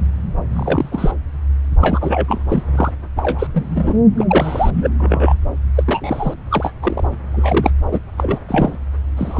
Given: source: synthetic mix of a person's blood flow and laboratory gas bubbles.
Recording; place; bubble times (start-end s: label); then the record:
Doppler ultrasound of blood flow; subclavian vein
0.53-1.12 s: bubbles
1.80-2.25 s: bubbles
2.28-2.43 s: bubbles
2.49-2.63 s: bubbles
2.75-2.92 s: bubbles
3.17-3.47 s: bubbles
3.53-3.96 s: bubbles
4.17-4.25 s: bubbles
4.29-4.71 s: bubbles
4.74-4.89 s: bubbles
5.00-5.36 s: bubbles
5.75-5.83 s: bubbles
5.87-6.34 s: bubbles
6.49-6.72 s: bubbles
6.82-7.04 s: bubbles
7.32-7.71 s: bubbles
7.90-8.00 s: bubbles
8.17-8.39 s: bubbles
8.48-8.78 s: bubbles
9.17-9.39 s: bubbles
From the record:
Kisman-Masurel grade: 243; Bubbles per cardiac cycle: several, 3 to 8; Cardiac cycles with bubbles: 100%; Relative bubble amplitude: loud (0.450 to 0.775); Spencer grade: 3 (all of the cardiac periods contain showers or single bubble signals, but not dominating or overriding the cardiac motion signals); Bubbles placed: anywhere in the cardiac cycle